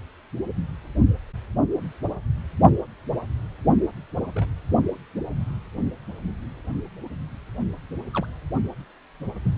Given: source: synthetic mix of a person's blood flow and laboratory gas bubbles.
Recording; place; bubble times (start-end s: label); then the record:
Doppler ultrasound of blood flow; precordium
4.34-4.48 s: bubbles
8.13-8.27 s: bubbles
9.45-9.48 s: bubbles
From the record:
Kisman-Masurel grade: 121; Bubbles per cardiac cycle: 1 to 2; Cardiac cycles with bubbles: 10 to 50%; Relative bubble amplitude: barely perceptible (0.100 to 0.250); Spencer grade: 2 (many but less than half of the cardiac periods contain bubble signals, singularly or in groups); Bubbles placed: only in the low amplitude regions of the cardiac cycle